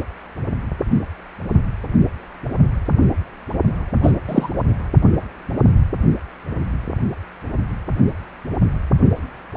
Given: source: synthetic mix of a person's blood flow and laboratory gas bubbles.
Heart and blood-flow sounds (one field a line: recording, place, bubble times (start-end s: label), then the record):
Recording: Doppler ultrasound of blood flow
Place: precordium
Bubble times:
4.02-4.12 s: bubbles
4.28-4.50 s: bubbles
From the record:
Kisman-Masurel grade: 123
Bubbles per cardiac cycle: 1 to 2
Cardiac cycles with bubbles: 10 to 50%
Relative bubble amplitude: loud (0.450 to 0.775)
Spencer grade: 2 (many but less than half of the cardiac periods contain bubble signals, singularly or in groups)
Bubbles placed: only in the low amplitude regions of the cardiac cycle